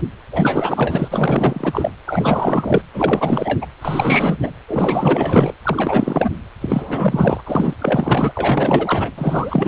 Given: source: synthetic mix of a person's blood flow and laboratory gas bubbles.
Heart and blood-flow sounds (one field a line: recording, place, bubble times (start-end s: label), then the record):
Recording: Doppler ultrasound of blood flow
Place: precordium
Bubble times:
0.00-0.03 s: bubbles
0.32-1.08 s: bubbles
1.10-1.90 s: bubbles
2.06-2.82 s: bubbles
2.94-3.67 s: bubbles
3.81-4.39 s: bubbles
4.43-4.51 s: bubbles
4.68-5.54 s: bubbles
5.64-6.30 s: bubbles
6.61-7.43 s: bubbles
7.46-7.74 s: bubbles
7.79-8.32 s: bubbles
8.35-9.11 s: bubbles
9.17-9.68 s: bubbles
From the record:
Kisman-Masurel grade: 444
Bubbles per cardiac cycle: continuous sound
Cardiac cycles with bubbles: 100%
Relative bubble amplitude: maximal (0.775 to 0.999)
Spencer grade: 4 (maximum detectable bubble signal sounding continuously throughout systole and diastole of every cardiac period, and overriding the amplitude of the normal cardiac signals)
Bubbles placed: anywhere in the cardiac cycle